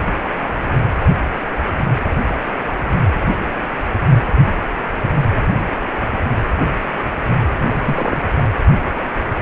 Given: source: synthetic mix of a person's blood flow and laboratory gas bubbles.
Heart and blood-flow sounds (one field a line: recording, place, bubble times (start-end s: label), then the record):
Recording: Doppler ultrasound of blood flow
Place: precordium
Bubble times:
7.65-8.18 s: bubbles
8.38-8.44 s: bubbles
From the record:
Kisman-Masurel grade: 221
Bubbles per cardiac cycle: several, 3 to 8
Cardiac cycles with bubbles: 10 to 50%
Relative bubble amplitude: barely perceptible (0.100 to 0.250)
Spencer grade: 2 (many but less than half of the cardiac periods contain bubble signals, singularly or in groups)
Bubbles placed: anywhere in the cardiac cycle